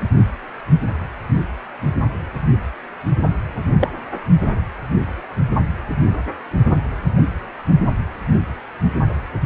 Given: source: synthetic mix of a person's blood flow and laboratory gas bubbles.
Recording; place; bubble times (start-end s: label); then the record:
Doppler ultrasound of blood flow; precordium
3.81-3.92 s: bubbles
From the record:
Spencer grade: 2 (many but less than half of the cardiac periods contain bubble signals, singularly or in groups); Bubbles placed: only in the low amplitude regions of the cardiac cycle